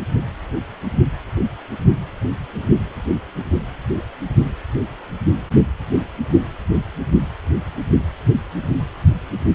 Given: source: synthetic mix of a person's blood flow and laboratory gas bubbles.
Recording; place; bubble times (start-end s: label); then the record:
Doppler ultrasound of blood flow; precordium
no bubbles
From the record:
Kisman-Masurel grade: 000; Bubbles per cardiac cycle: 0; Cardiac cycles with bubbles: 0%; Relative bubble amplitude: no bubbles discernible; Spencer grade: 0 (complete lack of bubble signals)